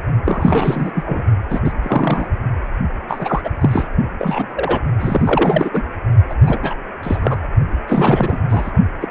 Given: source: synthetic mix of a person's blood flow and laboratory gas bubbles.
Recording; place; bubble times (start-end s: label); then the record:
Doppler ultrasound of blood flow; precordium
0.25-0.92 s: bubbles
0.95-1.03 s: bubbles
1.06-1.24 s: bubbles
1.50-1.60 s: bubbles
1.64-1.72 s: bubbles
1.82-2.28 s: bubbles
3.07-3.49 s: bubbles
3.60-3.88 s: bubbles
4.19-4.81 s: bubbles
5.00-5.71 s: bubbles
5.74-5.83 s: bubbles
6.29-6.35 s: bubbles
6.41-6.59 s: bubbles
6.62-6.75 s: bubbles
7.03-7.40 s: bubbles
7.88-8.38 s: bubbles
8.50-8.71 s: bubbles
9.01-9.08 s: bubbles
From the record:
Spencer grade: 3 (all of the cardiac periods contain showers or single bubble signals, but not dominating or overriding the cardiac motion signals); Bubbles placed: only in the low amplitude regions of the cardiac cycle